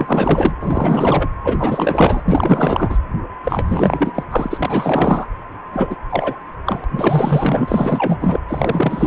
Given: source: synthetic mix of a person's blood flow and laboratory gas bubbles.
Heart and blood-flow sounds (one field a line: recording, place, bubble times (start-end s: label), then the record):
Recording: Doppler ultrasound of blood flow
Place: precordium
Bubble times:
0.00-0.54 s: bubbles
0.60-1.29 s: bubbles
1.44-2.22 s: bubbles
2.25-2.97 s: bubbles
3.43-4.12 s: bubbles
4.14-4.23 s: bubbles
4.30-5.26 s: bubbles
5.72-5.96 s: bubbles
6.09-6.39 s: bubbles
6.65-6.84 s: bubbles
6.91-8.39 s: bubbles
8.47-9.07 s: bubbles
From the record:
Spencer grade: 4 (maximum detectable bubble signal sounding continuously throughout systole and diastole of every cardiac period, and overriding the amplitude of the normal cardiac signals)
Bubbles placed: anywhere in the cardiac cycle